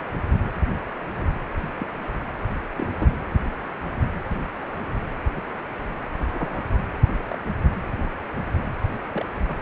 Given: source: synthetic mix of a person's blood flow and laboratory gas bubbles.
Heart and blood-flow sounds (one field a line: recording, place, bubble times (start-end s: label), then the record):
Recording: Doppler ultrasound of blood flow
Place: precordium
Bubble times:
1.15-1.32 s: bubbles
1.61-1.69 s: bubbles
1.76-1.86 s: bubbles
2.76-3.18 s: bubbles
5.36-5.41 s: bubbles
6.23-6.63 s: bubbles
7.29-7.38 s: bubbles
9.12-9.25 s: bubbles
9.48-9.54 s: bubbles
From the record:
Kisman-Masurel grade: 121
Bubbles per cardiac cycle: 1 to 2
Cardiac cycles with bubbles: 10 to 50%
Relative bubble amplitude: barely perceptible (0.100 to 0.250)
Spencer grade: 2 (many but less than half of the cardiac periods contain bubble signals, singularly or in groups)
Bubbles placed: anywhere in the cardiac cycle